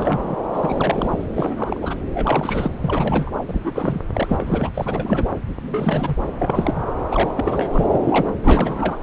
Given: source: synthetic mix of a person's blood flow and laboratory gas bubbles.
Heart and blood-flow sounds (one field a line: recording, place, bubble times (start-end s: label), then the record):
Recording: Doppler ultrasound of blood flow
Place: subclavian vein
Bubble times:
0.00-0.36 s: bubbles
0.52-1.24 s: bubbles
1.33-1.96 s: bubbles
2.09-2.79 s: bubbles
2.81-3.43 s: bubbles
3.48-4.03 s: bubbles
4.13-4.70 s: bubbles
4.74-5.34 s: bubbles
5.62-6.15 s: bubbles
6.38-6.82 s: bubbles
7.09-7.32 s: bubbles
7.37-8.33 s: bubbles
8.43-8.98 s: bubbles
From the record:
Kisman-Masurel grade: 342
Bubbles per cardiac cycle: rolling drumbeat, 9 or more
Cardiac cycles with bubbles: 100%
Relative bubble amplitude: moderate (0.250 to 0.450)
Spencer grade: 3 (all of the cardiac periods contain showers or single bubble signals, but not dominating or overriding the cardiac motion signals)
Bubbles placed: anywhere in the cardiac cycle